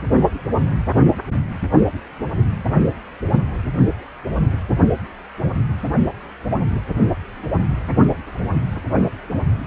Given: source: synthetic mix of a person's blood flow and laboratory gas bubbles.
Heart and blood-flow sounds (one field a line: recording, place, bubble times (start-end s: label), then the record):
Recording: Doppler ultrasound of blood flow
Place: precordium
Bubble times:
no bubbles
From the record:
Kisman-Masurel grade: 000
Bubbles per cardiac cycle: 0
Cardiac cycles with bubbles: 0%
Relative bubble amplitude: no bubbles discernible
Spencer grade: 0 (complete lack of bubble signals)